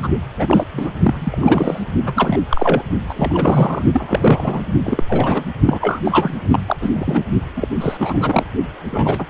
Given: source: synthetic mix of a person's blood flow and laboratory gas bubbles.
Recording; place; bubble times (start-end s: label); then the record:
Doppler ultrasound of blood flow; precordium
0.00-0.08 s: bubbles
0.38-0.66 s: bubbles
0.73-0.91 s: bubbles
1.02-1.84 s: bubbles
2.06-2.13 s: bubbles
2.15-2.40 s: bubbles
2.49-2.83 s: bubbles
3.08-3.82 s: bubbles
3.93-4.62 s: bubbles
4.83-5.04 s: bubbles
5.08-5.44 s: bubbles
5.66-6.01 s: bubbles
6.04-6.64 s: bubbles
6.67-6.77 s: bubbles
6.80-6.90 s: bubbles
6.95-7.23 s: bubbles
7.56-7.68 s: bubbles
7.80-8.44 s: bubbles
8.83-9.26 s: bubbles
From the record:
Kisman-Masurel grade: 342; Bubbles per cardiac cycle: rolling drumbeat, 9 or more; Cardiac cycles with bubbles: 100%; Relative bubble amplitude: moderate (0.250 to 0.450); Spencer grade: 3 (all of the cardiac periods contain showers or single bubble signals, but not dominating or overriding the cardiac motion signals); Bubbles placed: only in the low amplitude regions of the cardiac cycle